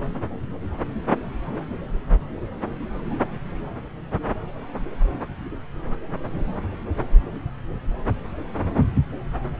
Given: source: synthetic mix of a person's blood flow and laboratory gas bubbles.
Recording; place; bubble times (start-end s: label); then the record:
Doppler ultrasound of blood flow; subclavian vein
no bubbles
From the record:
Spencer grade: 0 (complete lack of bubble signals)